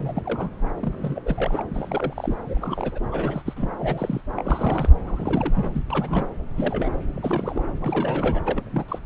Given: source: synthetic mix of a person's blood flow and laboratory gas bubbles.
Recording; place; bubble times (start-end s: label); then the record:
Doppler ultrasound of blood flow; subclavian vein
0.00-0.49 s: bubbles
0.79-1.22 s: bubbles
1.25-1.62 s: bubbles
1.70-2.35 s: bubbles
2.46-2.99 s: bubbles
3.12-3.42 s: bubbles
3.46-3.54 s: bubbles
3.56-3.69 s: bubbles
3.77-4.21 s: bubbles
4.35-4.89 s: bubbles
5.06-5.71 s: bubbles
5.73-5.82 s: bubbles
5.90-6.29 s: bubbles
6.56-6.92 s: bubbles
7.15-7.63 s: bubbles
7.80-8.42 s: bubbles
8.46-8.99 s: bubbles
From the record:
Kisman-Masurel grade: 342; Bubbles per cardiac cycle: rolling drumbeat, 9 or more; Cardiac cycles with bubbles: 100%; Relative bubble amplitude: moderate (0.250 to 0.450); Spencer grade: 3 (all of the cardiac periods contain showers or single bubble signals, but not dominating or overriding the cardiac motion signals); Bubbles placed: anywhere in the cardiac cycle